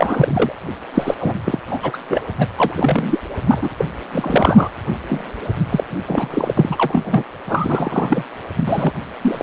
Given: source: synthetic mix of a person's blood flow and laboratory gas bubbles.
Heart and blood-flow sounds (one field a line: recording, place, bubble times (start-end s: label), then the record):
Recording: Doppler ultrasound of blood flow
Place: precordium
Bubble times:
0.00-0.53 s: bubbles
0.93-1.15 s: bubbles
1.20-1.35 s: bubbles
1.44-1.59 s: bubbles
1.67-1.80 s: bubbles
1.83-1.98 s: bubbles
2.08-2.22 s: bubbles
2.39-2.49 s: bubbles
2.58-2.75 s: bubbles
2.77-3.20 s: bubbles
3.48-3.69 s: bubbles
3.77-3.85 s: bubbles
4.12-4.69 s: bubbles
5.09-5.25 s: bubbles
5.69-5.84 s: bubbles
6.07-6.54 s: bubbles
6.57-7.23 s: bubbles
7.48-8.23 s: bubbles
8.56-8.93 s: bubbles
9.21-9.42 s: bubbles
From the record:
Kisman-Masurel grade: 343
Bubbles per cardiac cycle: rolling drumbeat, 9 or more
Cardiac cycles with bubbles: 100%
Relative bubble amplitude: loud (0.450 to 0.775)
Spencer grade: 3 (all of the cardiac periods contain showers or single bubble signals, but not dominating or overriding the cardiac motion signals)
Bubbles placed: anywhere in the cardiac cycle